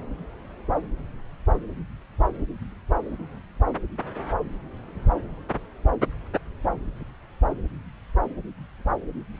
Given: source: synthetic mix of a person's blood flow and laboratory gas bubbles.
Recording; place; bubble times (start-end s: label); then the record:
Doppler ultrasound of blood flow; subclavian vein
no bubbles
From the record:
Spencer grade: 0 (complete lack of bubble signals)